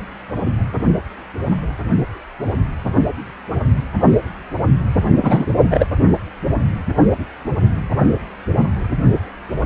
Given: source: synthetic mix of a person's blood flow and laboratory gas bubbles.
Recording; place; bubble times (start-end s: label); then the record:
Doppler ultrasound of blood flow; precordium
5.22-5.87 s: bubbles
From the record:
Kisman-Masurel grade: 213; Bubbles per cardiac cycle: several, 3 to 8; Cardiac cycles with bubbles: 1 to 10%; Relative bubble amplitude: loud (0.450 to 0.775); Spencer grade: 1 (occasional bubble signal discernible with the cardiac motion signal, with majority of cardiac periods free of bubbles); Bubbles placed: only in the low amplitude regions of the cardiac cycle